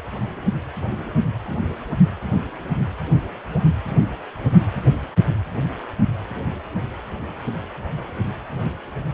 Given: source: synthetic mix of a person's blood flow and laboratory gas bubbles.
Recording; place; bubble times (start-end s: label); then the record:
Doppler ultrasound of blood flow; precordium
no bubbles
From the record:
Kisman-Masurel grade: 000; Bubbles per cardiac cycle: 0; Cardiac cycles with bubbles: 0%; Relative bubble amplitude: no bubbles discernible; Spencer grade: 0 (complete lack of bubble signals)